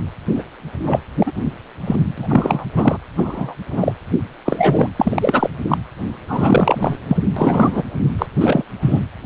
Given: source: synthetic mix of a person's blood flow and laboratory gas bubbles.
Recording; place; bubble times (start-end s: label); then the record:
Doppler ultrasound of blood flow; precordium
0.34-0.43 s: bubbles
0.85-0.99 s: bubbles
1.20-1.31 s: bubbles
1.86-1.96 s: bubbles
2.17-2.65 s: bubbles
2.75-2.98 s: bubbles
3.17-3.54 s: bubbles
3.71-3.93 s: bubbles
4.45-4.88 s: bubbles
4.96-5.49 s: bubbles
5.68-5.78 s: bubbles
6.28-6.97 s: bubbles
7.09-7.17 s: bubbles
7.36-7.83 s: bubbles
8.18-8.26 s: bubbles
8.41-8.62 s: bubbles
8.81-9.01 s: bubbles
From the record:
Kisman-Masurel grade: 233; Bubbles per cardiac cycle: several, 3 to 8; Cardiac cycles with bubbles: 50 to 99%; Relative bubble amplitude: loud (0.450 to 0.775); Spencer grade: 3 (all of the cardiac periods contain showers or single bubble signals, but not dominating or overriding the cardiac motion signals); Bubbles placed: anywhere in the cardiac cycle